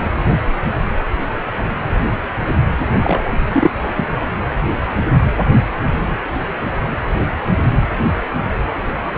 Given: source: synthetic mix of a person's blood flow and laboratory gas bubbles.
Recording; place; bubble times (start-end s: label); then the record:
Doppler ultrasound of blood flow; precordium
3.03-3.22 s: bubbles
3.52-3.71 s: bubbles
3.96-4.05 s: bubbles
From the record:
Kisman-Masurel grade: 213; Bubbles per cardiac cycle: several, 3 to 8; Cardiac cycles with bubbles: 1 to 10%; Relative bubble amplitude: loud (0.450 to 0.775); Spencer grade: 1 (occasional bubble signal discernible with the cardiac motion signal, with majority of cardiac periods free of bubbles); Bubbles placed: anywhere in the cardiac cycle